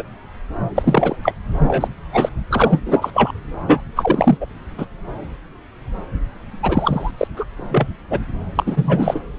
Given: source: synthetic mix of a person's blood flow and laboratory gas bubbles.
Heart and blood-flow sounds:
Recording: Doppler ultrasound of blood flow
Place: subclavian vein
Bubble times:
0.00-0.03 s: bubbles
0.75-1.16 s: bubbles
1.23-1.33 s: bubbles
1.68-1.88 s: bubbles
2.12-2.29 s: bubbles
2.51-2.80 s: bubbles
2.85-3.10 s: bubbles
3.14-3.31 s: bubbles
3.67-3.81 s: bubbles
3.96-4.38 s: bubbles
4.40-4.46 s: bubbles
4.77-4.85 s: bubbles
6.62-7.11 s: bubbles
7.17-7.27 s: bubbles
7.36-7.45 s: bubbles
7.57-7.88 s: bubbles
8.10-8.19 s: bubbles
8.55-9.20 s: bubbles
From the record:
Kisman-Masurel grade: 233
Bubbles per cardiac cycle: several, 3 to 8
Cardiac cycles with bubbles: 50 to 99%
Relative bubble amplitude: loud (0.450 to 0.775)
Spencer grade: 3 (all of the cardiac periods contain showers or single bubble signals, but not dominating or overriding the cardiac motion signals)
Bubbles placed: anywhere in the cardiac cycle

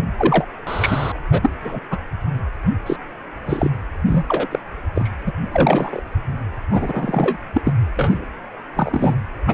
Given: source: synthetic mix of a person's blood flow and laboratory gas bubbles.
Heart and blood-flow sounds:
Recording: Doppler ultrasound of blood flow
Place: precordium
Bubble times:
0.17-0.45 s: bubbles
0.67-1.12 s: bubbles
1.31-1.51 s: bubbles
1.61-1.80 s: bubbles
1.90-1.97 s: bubbles
2.86-2.97 s: bubbles
3.46-3.70 s: bubbles
4.06-4.24 s: bubbles
4.28-4.47 s: bubbles
4.51-4.59 s: bubbles
4.95-5.10 s: bubbles
5.26-5.32 s: bubbles
5.52-6.03 s: bubbles
6.70-7.37 s: bubbles
7.54-7.61 s: bubbles
7.64-7.72 s: bubbles
7.97-8.25 s: bubbles
8.75-9.15 s: bubbles
9.47-9.54 s: bubbles
From the record:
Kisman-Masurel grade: 243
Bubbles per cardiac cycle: several, 3 to 8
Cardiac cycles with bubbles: 100%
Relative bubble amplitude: loud (0.450 to 0.775)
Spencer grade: 3 (all of the cardiac periods contain showers or single bubble signals, but not dominating or overriding the cardiac motion signals)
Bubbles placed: anywhere in the cardiac cycle

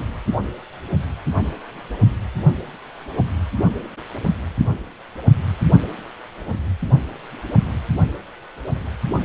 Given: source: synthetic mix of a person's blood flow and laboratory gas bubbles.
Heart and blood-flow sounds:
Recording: Doppler ultrasound of blood flow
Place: precordium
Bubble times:
no bubbles
From the record:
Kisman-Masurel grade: 000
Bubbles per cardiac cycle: 0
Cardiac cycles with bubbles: 0%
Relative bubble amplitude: no bubbles discernible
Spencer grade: 0 (complete lack of bubble signals)

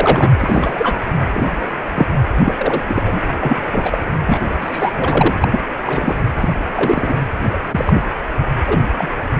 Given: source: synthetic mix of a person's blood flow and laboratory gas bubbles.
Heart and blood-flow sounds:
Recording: Doppler ultrasound of blood flow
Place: precordium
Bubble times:
0.00-0.32 s: bubbles
0.40-0.98 s: bubbles
1.32-1.69 s: bubbles
1.95-2.07 s: bubbles
2.34-2.54 s: bubbles
2.58-2.82 s: bubbles
2.84-3.03 s: bubbles
3.05-3.21 s: bubbles
3.39-3.61 s: bubbles
3.71-3.98 s: bubbles
4.26-4.39 s: bubbles
4.60-4.92 s: bubbles
4.96-5.35 s: bubbles
5.41-5.60 s: bubbles
5.77-6.15 s: bubbles
6.40-6.54 s: bubbles
6.75-7.15 s: bubbles
7.52-7.57 s: bubbles
7.69-8.08 s: bubbles
8.66-8.79 s: bubbles
8.98-9.08 s: bubbles
From the record:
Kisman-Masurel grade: 243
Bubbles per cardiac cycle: several, 3 to 8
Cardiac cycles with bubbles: 100%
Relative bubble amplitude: loud (0.450 to 0.775)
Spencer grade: 3 (all of the cardiac periods contain showers or single bubble signals, but not dominating or overriding the cardiac motion signals)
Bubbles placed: anywhere in the cardiac cycle

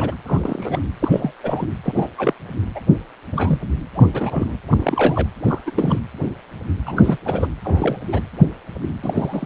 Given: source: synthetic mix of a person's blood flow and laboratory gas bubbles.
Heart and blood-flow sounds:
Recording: Doppler ultrasound of blood flow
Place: precordium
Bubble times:
0.00-0.15 s: bubbles
0.26-0.86 s: bubbles
0.99-1.32 s: bubbles
1.43-1.66 s: bubbles
1.83-2.08 s: bubbles
2.17-2.33 s: bubbles
2.75-2.80 s: bubbles
3.33-3.59 s: bubbles
3.95-4.08 s: bubbles
4.13-4.56 s: bubbles
4.70-5.27 s: bubbles
5.45-5.58 s: bubbles
5.66-5.71 s: bubbles
5.75-5.99 s: bubbles
6.85-7.17 s: bubbles
7.25-7.47 s: bubbles
7.64-7.97 s: bubbles
8.11-8.21 s: bubbles
9.02-9.46 s: bubbles
From the record:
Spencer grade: 3 (all of the cardiac periods contain showers or single bubble signals, but not dominating or overriding the cardiac motion signals)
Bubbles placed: anywhere in the cardiac cycle

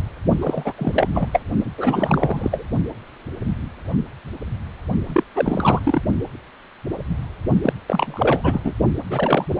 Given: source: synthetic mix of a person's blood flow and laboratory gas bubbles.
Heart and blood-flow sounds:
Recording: Doppler ultrasound of blood flow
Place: precordium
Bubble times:
0.42-0.72 s: bubbles
0.78-1.08 s: bubbles
1.12-1.27 s: bubbles
1.32-1.40 s: bubbles
1.78-2.65 s: bubbles
5.07-5.24 s: bubbles
5.35-5.80 s: bubbles
5.85-6.00 s: bubbles
7.62-7.73 s: bubbles
7.88-8.60 s: bubbles
8.64-8.72 s: bubbles
9.10-9.46 s: bubbles
9.57-9.60 s: bubbles
From the record:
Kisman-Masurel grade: 332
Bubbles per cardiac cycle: rolling drumbeat, 9 or more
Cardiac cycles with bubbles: 50 to 99%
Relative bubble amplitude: moderate (0.250 to 0.450)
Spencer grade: 3 (all of the cardiac periods contain showers or single bubble signals, but not dominating or overriding the cardiac motion signals)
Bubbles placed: only in the low amplitude regions of the cardiac cycle

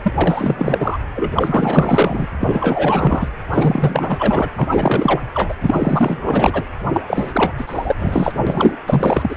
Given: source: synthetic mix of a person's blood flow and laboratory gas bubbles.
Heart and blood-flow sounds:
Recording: Doppler ultrasound of blood flow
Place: precordium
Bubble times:
0.04-0.98 s: bubbles
1.15-1.31 s: bubbles
1.34-2.27 s: bubbles
2.40-3.29 s: bubbles
3.50-4.49 s: bubbles
4.56-4.68 s: bubbles
4.71-5.21 s: bubbles
5.33-5.55 s: bubbles
5.62-6.63 s: bubbles
6.93-7.01 s: bubbles
7.08-7.52 s: bubbles
7.57-7.96 s: bubbles
7.99-8.35 s: bubbles
8.46-8.76 s: bubbles
8.87-9.36 s: bubbles
From the record:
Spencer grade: 4 (maximum detectable bubble signal sounding continuously throughout systole and diastole of every cardiac period, and overriding the amplitude of the normal cardiac signals)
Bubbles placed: anywhere in the cardiac cycle

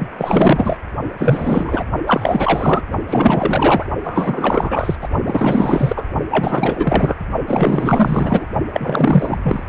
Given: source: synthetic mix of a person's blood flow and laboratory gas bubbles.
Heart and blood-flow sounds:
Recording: Doppler ultrasound of blood flow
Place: precordium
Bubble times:
0.00-0.05 s: bubbles
0.17-0.80 s: bubbles
1.17-1.83 s: bubbles
2.05-2.82 s: bubbles
3.09-3.86 s: bubbles
4.04-4.96 s: bubbles
5.01-5.08 s: bubbles
5.25-6.04 s: bubbles
6.31-7.16 s: bubbles
7.47-8.47 s: bubbles
8.73-9.63 s: bubbles
From the record:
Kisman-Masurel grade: 444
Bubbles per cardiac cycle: continuous sound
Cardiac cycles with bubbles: 100%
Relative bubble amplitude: maximal (0.775 to 0.999)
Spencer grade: 4 (maximum detectable bubble signal sounding continuously throughout systole and diastole of every cardiac period, and overriding the amplitude of the normal cardiac signals)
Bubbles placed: only in the low amplitude regions of the cardiac cycle

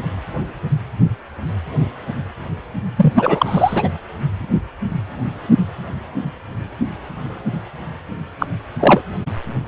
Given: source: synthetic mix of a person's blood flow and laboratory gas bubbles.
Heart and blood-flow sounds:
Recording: Doppler ultrasound of blood flow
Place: precordium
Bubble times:
2.96-3.88 s: bubbles
8.39-8.46 s: bubbles
8.79-9.02 s: bubbles
From the record:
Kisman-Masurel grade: 223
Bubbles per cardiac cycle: several, 3 to 8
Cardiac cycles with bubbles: 10 to 50%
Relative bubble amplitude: loud (0.450 to 0.775)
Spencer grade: 2 (many but less than half of the cardiac periods contain bubble signals, singularly or in groups)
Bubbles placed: anywhere in the cardiac cycle

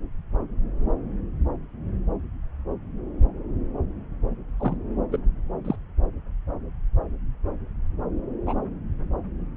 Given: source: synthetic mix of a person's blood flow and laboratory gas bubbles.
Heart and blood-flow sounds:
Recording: Doppler ultrasound of blood flow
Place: subclavian vein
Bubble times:
4.58-4.76 s: bubbles
5.12-5.18 s: bubbles
5.64-5.76 s: bubbles
8.46-8.54 s: bubbles
From the record:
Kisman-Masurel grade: 122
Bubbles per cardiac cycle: 1 to 2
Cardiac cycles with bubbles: 10 to 50%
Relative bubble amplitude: moderate (0.250 to 0.450)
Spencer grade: 2 (many but less than half of the cardiac periods contain bubble signals, singularly or in groups)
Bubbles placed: anywhere in the cardiac cycle

